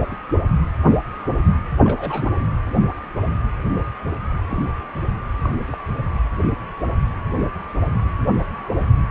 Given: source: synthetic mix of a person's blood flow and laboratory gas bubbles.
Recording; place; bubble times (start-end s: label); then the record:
Doppler ultrasound of blood flow; precordium
0.11-0.15 s: bubbles
0.61-0.66 s: bubbles
1.84-2.29 s: bubbles
4.49-4.63 s: bubbles
4.95-5.00 s: bubbles
5.42-5.55 s: bubbles
5.71-5.79 s: bubbles
From the record:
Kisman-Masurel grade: 121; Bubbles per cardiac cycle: 1 to 2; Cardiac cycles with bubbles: 10 to 50%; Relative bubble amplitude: barely perceptible (0.100 to 0.250); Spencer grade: 2 (many but less than half of the cardiac periods contain bubble signals, singularly or in groups); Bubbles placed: anywhere in the cardiac cycle